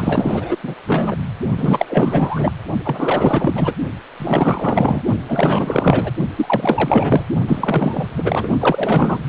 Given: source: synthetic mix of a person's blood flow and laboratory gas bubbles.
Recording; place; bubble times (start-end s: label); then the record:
Doppler ultrasound of blood flow; precordium
0.00-0.58 s: bubbles
0.63-0.74 s: bubbles
0.86-1.17 s: bubbles
1.57-1.85 s: bubbles
1.88-2.52 s: bubbles
2.84-3.74 s: bubbles
4.19-5.02 s: bubbles
5.28-6.12 s: bubbles
6.36-7.27 s: bubbles
7.47-8.49 s: bubbles
8.59-9.23 s: bubbles
From the record:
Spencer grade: 4 (maximum detectable bubble signal sounding continuously throughout systole and diastole of every cardiac period, and overriding the amplitude of the normal cardiac signals); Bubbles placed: only in the low amplitude regions of the cardiac cycle